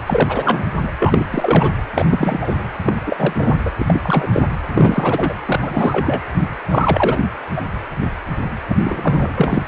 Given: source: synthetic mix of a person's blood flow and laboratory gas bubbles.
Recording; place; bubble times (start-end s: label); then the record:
Doppler ultrasound of blood flow; precordium
0.06-0.65 s: bubbles
0.82-0.91 s: bubbles
0.99-1.73 s: bubbles
1.94-2.06 s: bubbles
2.09-2.54 s: bubbles
2.83-2.95 s: bubbles
3.07-3.54 s: bubbles
3.65-3.71 s: bubbles
3.79-4.29 s: bubbles
4.33-4.48 s: bubbles
4.74-5.34 s: bubbles
5.47-5.60 s: bubbles
5.62-6.21 s: bubbles
6.69-7.20 s: bubbles
7.55-7.62 s: bubbles
8.00-8.08 s: bubbles
8.69-8.76 s: bubbles
8.85-9.63 s: bubbles
From the record:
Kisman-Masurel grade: 333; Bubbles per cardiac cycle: rolling drumbeat, 9 or more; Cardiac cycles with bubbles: 50 to 99%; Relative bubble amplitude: loud (0.450 to 0.775); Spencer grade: 3 (all of the cardiac periods contain showers or single bubble signals, but not dominating or overriding the cardiac motion signals); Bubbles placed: anywhere in the cardiac cycle